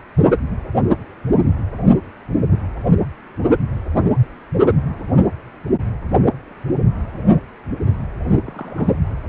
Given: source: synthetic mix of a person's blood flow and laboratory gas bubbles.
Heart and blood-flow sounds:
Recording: Doppler ultrasound of blood flow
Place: precordium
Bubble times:
8.36-9.00 s: bubbles
From the record:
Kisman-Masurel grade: 221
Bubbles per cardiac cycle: several, 3 to 8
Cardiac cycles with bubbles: 10 to 50%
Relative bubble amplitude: barely perceptible (0.100 to 0.250)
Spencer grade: 2 (many but less than half of the cardiac periods contain bubble signals, singularly or in groups)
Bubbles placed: anywhere in the cardiac cycle

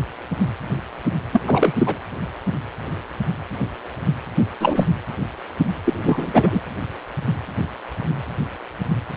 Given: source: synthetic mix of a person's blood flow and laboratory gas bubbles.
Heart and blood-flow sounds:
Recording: Doppler ultrasound of blood flow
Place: precordium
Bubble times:
1.32-1.41 s: bubbles
1.47-1.73 s: bubbles
1.78-1.97 s: bubbles
4.60-4.86 s: bubbles
5.85-6.62 s: bubbles
From the record:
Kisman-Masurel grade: 223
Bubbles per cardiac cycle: several, 3 to 8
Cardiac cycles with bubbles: 10 to 50%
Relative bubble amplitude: loud (0.450 to 0.775)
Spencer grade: 2 (many but less than half of the cardiac periods contain bubble signals, singularly or in groups)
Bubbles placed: anywhere in the cardiac cycle

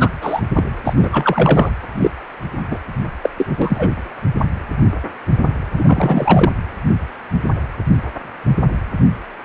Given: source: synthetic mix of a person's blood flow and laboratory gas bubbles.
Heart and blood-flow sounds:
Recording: Doppler ultrasound of blood flow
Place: precordium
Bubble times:
0.00-0.09 s: bubbles
0.22-0.41 s: bubbles
0.55-0.63 s: bubbles
0.84-0.94 s: bubbles
0.98-1.70 s: bubbles
1.99-2.10 s: bubbles
2.71-2.79 s: bubbles
3.23-3.30 s: bubbles
3.37-3.90 s: bubbles
5.78-6.52 s: bubbles
From the record:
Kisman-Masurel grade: 233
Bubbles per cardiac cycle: several, 3 to 8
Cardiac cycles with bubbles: 50 to 99%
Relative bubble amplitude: loud (0.450 to 0.775)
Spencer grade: 3 (all of the cardiac periods contain showers or single bubble signals, but not dominating or overriding the cardiac motion signals)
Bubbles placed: anywhere in the cardiac cycle

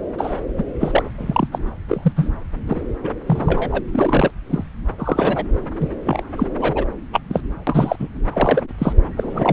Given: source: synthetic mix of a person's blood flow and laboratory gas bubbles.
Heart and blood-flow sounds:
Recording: Doppler ultrasound of blood flow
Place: subclavian vein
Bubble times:
0.18-0.40 s: bubbles
0.57-0.65 s: bubbles
0.80-1.10 s: bubbles
1.17-1.48 s: bubbles
1.52-1.58 s: bubbles
1.88-2.12 s: bubbles
2.16-2.30 s: bubbles
2.67-2.81 s: bubbles
3.04-3.11 s: bubbles
3.27-3.81 s: bubbles
3.92-4.30 s: bubbles
4.50-4.64 s: bubbles
4.98-5.45 s: bubbles
5.80-5.87 s: bubbles
6.05-6.22 s: bubbles
6.37-6.46 s: bubbles
6.58-6.85 s: bubbles
7.13-7.20 s: bubbles
7.29-7.41 s: bubbles
7.67-7.96 s: bubbles
7.99-8.08 s: bubbles
8.33-8.62 s: bubbles
8.78-8.93 s: bubbles
9.16-9.52 s: bubbles
From the record:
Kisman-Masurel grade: 242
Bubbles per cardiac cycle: several, 3 to 8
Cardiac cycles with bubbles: 100%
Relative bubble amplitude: moderate (0.250 to 0.450)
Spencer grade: 3 (all of the cardiac periods contain showers or single bubble signals, but not dominating or overriding the cardiac motion signals)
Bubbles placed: anywhere in the cardiac cycle

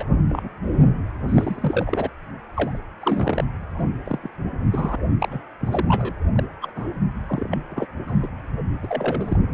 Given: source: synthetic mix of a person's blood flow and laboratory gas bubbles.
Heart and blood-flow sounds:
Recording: Doppler ultrasound of blood flow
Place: precordium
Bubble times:
0.00-0.04 s: bubbles
0.29-0.49 s: bubbles
1.28-2.09 s: bubbles
2.53-2.78 s: bubbles
3.01-3.45 s: bubbles
3.76-3.87 s: bubbles
4.05-4.19 s: bubbles
4.23-4.29 s: bubbles
4.71-4.96 s: bubbles
5.21-5.45 s: bubbles
5.60-5.85 s: bubbles
5.88-6.13 s: bubbles
6.35-6.43 s: bubbles
6.62-6.70 s: bubbles
6.76-6.88 s: bubbles
7.29-7.58 s: bubbles
7.69-7.86 s: bubbles
8.07-8.28 s: bubbles
8.83-9.40 s: bubbles
From the record:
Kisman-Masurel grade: 232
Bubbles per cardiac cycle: several, 3 to 8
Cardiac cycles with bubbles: 50 to 99%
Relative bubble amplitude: moderate (0.250 to 0.450)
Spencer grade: 3 (all of the cardiac periods contain showers or single bubble signals, but not dominating or overriding the cardiac motion signals)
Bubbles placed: anywhere in the cardiac cycle

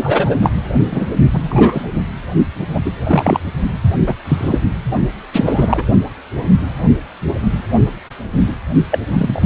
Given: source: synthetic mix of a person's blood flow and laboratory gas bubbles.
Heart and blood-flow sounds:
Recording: Doppler ultrasound of blood flow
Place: precordium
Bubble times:
0.02-0.51 s: bubbles
0.90-1.07 s: bubbles
1.33-1.88 s: bubbles
2.73-2.81 s: bubbles
2.85-2.92 s: bubbles
3.04-3.40 s: bubbles
4.07-4.14 s: bubbles
4.25-4.58 s: bubbles
5.33-5.83 s: bubbles
8.90-8.98 s: bubbles
9.17-9.46 s: bubbles
From the record:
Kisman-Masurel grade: 233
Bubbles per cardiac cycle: several, 3 to 8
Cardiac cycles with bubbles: 50 to 99%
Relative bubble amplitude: loud (0.450 to 0.775)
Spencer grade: 3 (all of the cardiac periods contain showers or single bubble signals, but not dominating or overriding the cardiac motion signals)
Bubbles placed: only in the low amplitude regions of the cardiac cycle

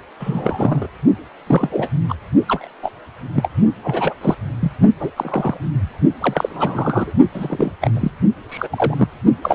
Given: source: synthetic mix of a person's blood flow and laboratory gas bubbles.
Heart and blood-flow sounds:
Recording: Doppler ultrasound of blood flow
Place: precordium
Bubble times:
0.20-0.87 s: bubbles
1.46-1.90 s: bubbles
2.09-2.15 s: bubbles
2.48-2.69 s: bubbles
2.83-2.91 s: bubbles
3.34-3.49 s: bubbles
3.84-4.14 s: bubbles
4.21-4.35 s: bubbles
4.61-4.71 s: bubbles
4.99-5.11 s: bubbles
5.16-5.57 s: bubbles
6.21-7.13 s: bubbles
7.33-7.71 s: bubbles
7.81-7.91 s: bubbles
7.93-8.11 s: bubbles
8.49-9.08 s: bubbles
9.42-9.54 s: bubbles
From the record:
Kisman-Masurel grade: 242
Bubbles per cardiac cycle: several, 3 to 8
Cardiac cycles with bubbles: 100%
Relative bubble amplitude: moderate (0.250 to 0.450)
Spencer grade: 3 (all of the cardiac periods contain showers or single bubble signals, but not dominating or overriding the cardiac motion signals)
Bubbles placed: only in the low amplitude regions of the cardiac cycle

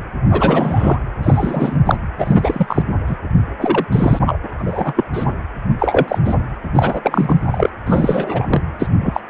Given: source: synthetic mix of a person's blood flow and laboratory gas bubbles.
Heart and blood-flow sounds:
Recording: Doppler ultrasound of blood flow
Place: precordium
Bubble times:
0.30-0.99 s: bubbles
1.23-1.78 s: bubbles
1.85-1.97 s: bubbles
2.18-2.83 s: bubbles
3.06-3.16 s: bubbles
3.61-3.85 s: bubbles
3.92-4.19 s: bubbles
4.26-4.38 s: bubbles
4.58-4.93 s: bubbles
4.96-5.04 s: bubbles
5.13-5.25 s: bubbles
5.79-6.18 s: bubbles
6.25-6.35 s: bubbles
6.73-7.69 s: bubbles
7.86-8.62 s: bubbles
8.79-8.88 s: bubbles
9.01-9.21 s: bubbles
From the record:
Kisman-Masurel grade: 243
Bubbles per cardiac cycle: several, 3 to 8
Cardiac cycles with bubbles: 100%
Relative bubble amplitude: loud (0.450 to 0.775)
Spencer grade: 3 (all of the cardiac periods contain showers or single bubble signals, but not dominating or overriding the cardiac motion signals)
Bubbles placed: anywhere in the cardiac cycle

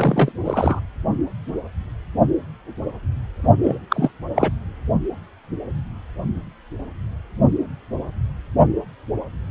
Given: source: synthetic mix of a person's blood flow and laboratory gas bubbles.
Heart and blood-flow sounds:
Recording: Doppler ultrasound of blood flow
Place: precordium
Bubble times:
0.00-0.32 s: bubbles
0.45-0.80 s: bubbles
3.62-3.78 s: bubbles
3.90-4.10 s: bubbles
4.35-4.50 s: bubbles
From the record:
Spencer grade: 2 (many but less than half of the cardiac periods contain bubble signals, singularly or in groups)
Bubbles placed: only in the low amplitude regions of the cardiac cycle

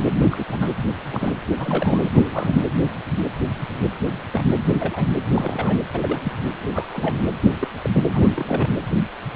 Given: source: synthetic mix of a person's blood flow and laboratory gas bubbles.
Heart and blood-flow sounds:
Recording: Doppler ultrasound of blood flow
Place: precordium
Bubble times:
0.19-0.28 s: bubbles
0.31-0.45 s: bubbles
0.51-0.73 s: bubbles
1.10-1.33 s: bubbles
1.58-2.09 s: bubbles
2.12-2.67 s: bubbles
4.33-4.42 s: bubbles
4.47-4.55 s: bubbles
4.78-5.05 s: bubbles
5.31-5.81 s: bubbles
5.93-5.99 s: bubbles
6.01-6.21 s: bubbles
6.23-6.32 s: bubbles
6.58-7.16 s: bubbles
7.59-7.67 s: bubbles
7.82-7.90 s: bubbles
7.92-8.03 s: bubbles
8.12-8.69 s: bubbles
From the record:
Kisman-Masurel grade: 232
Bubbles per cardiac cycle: several, 3 to 8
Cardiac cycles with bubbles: 50 to 99%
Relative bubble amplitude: moderate (0.250 to 0.450)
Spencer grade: 3 (all of the cardiac periods contain showers or single bubble signals, but not dominating or overriding the cardiac motion signals)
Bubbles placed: anywhere in the cardiac cycle

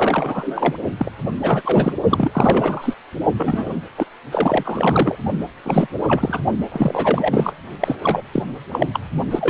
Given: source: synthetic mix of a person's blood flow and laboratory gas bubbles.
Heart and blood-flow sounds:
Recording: Doppler ultrasound of blood flow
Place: precordium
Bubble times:
0.00-0.78 s: bubbles
0.97-1.11 s: bubbles
1.42-1.62 s: bubbles
1.65-1.93 s: bubbles
2.10-2.94 s: bubbles
3.37-3.72 s: bubbles
3.97-4.05 s: bubbles
4.31-5.15 s: bubbles
5.65-5.88 s: bubbles
6.07-6.39 s: bubbles
6.72-7.53 s: bubbles
7.80-8.23 s: bubbles
8.32-8.42 s: bubbles
8.71-8.87 s: bubbles
8.94-8.99 s: bubbles
9.30-9.50 s: bubbles
From the record:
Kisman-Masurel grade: 343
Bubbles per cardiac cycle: rolling drumbeat, 9 or more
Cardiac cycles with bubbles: 100%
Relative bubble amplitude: loud (0.450 to 0.775)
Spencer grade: 3 (all of the cardiac periods contain showers or single bubble signals, but not dominating or overriding the cardiac motion signals)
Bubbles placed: only in the low amplitude regions of the cardiac cycle

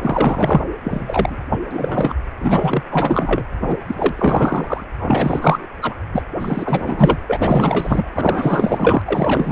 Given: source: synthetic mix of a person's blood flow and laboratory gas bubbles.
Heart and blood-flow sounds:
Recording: Doppler ultrasound of blood flow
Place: precordium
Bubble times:
0.02-0.63 s: bubbles
0.83-1.44 s: bubbles
1.50-1.59 s: bubbles
1.70-2.15 s: bubbles
2.40-2.82 s: bubbles
2.89-3.43 s: bubbles
3.60-3.77 s: bubbles
3.87-3.95 s: bubbles
3.98-4.83 s: bubbles
4.99-5.67 s: bubbles
5.81-5.94 s: bubbles
6.12-6.21 s: bubbles
6.39-7.18 s: bubbles
7.24-8.11 s: bubbles
8.15-9.02 s: bubbles
9.06-9.52 s: bubbles
From the record:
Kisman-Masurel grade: 444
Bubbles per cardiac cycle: continuous sound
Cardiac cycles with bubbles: 100%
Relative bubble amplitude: maximal (0.775 to 0.999)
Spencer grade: 4 (maximum detectable bubble signal sounding continuously throughout systole and diastole of every cardiac period, and overriding the amplitude of the normal cardiac signals)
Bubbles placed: anywhere in the cardiac cycle

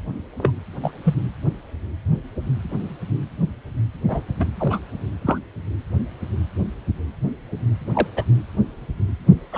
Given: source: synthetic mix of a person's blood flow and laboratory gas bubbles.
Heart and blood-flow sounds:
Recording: Doppler ultrasound of blood flow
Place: precordium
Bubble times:
0.38-0.52 s: bubbles
0.82-0.91 s: bubbles
1.03-1.15 s: bubbles
4.08-4.21 s: bubbles
4.39-4.45 s: bubbles
4.59-4.79 s: bubbles
5.21-5.38 s: bubbles
7.94-8.06 s: bubbles
8.16-8.23 s: bubbles
9.52-9.58 s: bubbles
From the record:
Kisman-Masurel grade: 122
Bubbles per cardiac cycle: 1 to 2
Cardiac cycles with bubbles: 10 to 50%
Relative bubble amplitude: moderate (0.250 to 0.450)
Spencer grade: 2 (many but less than half of the cardiac periods contain bubble signals, singularly or in groups)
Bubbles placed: anywhere in the cardiac cycle

